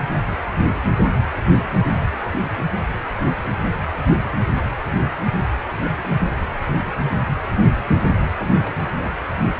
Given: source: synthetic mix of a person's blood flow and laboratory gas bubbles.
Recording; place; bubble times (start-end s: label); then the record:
Doppler ultrasound of blood flow; precordium
8.38-8.75 s: bubbles
8.96-9.13 s: bubbles
From the record:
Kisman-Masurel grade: 211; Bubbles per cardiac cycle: several, 3 to 8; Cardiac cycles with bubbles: 1 to 10%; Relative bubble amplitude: barely perceptible (0.100 to 0.250); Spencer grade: 1 (occasional bubble signal discernible with the cardiac motion signal, with majority of cardiac periods free of bubbles); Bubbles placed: anywhere in the cardiac cycle